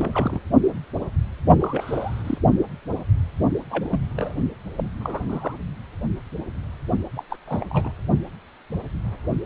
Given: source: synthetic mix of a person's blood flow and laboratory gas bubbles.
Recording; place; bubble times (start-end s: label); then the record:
Doppler ultrasound of blood flow; precordium
0.00-0.40 s: bubbles
1.59-2.38 s: bubbles
3.70-4.06 s: bubbles
4.16-4.36 s: bubbles
4.77-4.84 s: bubbles
5.00-5.58 s: bubbles
7.15-7.24 s: bubbles
7.29-7.37 s: bubbles
7.47-7.93 s: bubbles
From the record:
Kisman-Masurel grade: 221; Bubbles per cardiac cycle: several, 3 to 8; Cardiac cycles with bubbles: 10 to 50%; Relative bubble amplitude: barely perceptible (0.100 to 0.250); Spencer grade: 2 (many but less than half of the cardiac periods contain bubble signals, singularly or in groups); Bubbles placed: only in the low amplitude regions of the cardiac cycle